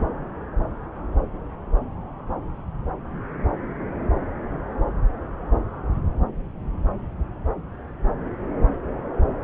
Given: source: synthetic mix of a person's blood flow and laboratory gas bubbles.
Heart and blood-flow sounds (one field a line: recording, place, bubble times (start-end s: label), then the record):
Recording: Doppler ultrasound of blood flow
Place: subclavian vein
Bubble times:
no bubbles
From the record:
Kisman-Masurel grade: 000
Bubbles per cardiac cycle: 0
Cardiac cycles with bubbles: 0%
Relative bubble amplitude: no bubbles discernible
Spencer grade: 0 (complete lack of bubble signals)